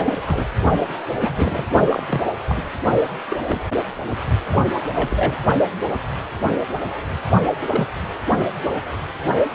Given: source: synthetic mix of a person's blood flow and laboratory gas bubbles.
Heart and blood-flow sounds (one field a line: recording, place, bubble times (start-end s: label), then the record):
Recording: Doppler ultrasound of blood flow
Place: precordium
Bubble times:
0.00-0.21 s: bubbles
0.26-0.48 s: bubbles
0.78-0.86 s: bubbles
1.21-1.66 s: bubbles
1.89-2.03 s: bubbles
2.08-2.21 s: bubbles
2.48-2.62 s: bubbles
3.29-3.37 s: bubbles
3.47-3.62 s: bubbles
4.50-4.65 s: bubbles
4.95-5.39 s: bubbles
7.61-7.88 s: bubbles
8.40-8.46 s: bubbles
From the record:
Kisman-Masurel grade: 222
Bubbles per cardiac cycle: several, 3 to 8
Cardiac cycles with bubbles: 10 to 50%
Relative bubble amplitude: moderate (0.250 to 0.450)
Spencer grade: 2 (many but less than half of the cardiac periods contain bubble signals, singularly or in groups)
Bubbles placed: only in the low amplitude regions of the cardiac cycle